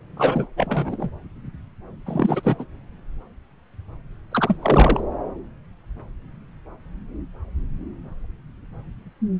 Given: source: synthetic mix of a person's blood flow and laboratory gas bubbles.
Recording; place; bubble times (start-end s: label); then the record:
Doppler ultrasound of blood flow; subclavian vein
0.16-0.47 s: bubbles
0.56-1.10 s: bubbles
2.06-2.55 s: bubbles
2.58-2.65 s: bubbles
4.31-4.58 s: bubbles
4.62-5.00 s: bubbles
From the record:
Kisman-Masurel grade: 223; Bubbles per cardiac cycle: several, 3 to 8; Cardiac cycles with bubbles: 10 to 50%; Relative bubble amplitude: loud (0.450 to 0.775); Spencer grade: 2 (many but less than half of the cardiac periods contain bubble signals, singularly or in groups); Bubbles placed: anywhere in the cardiac cycle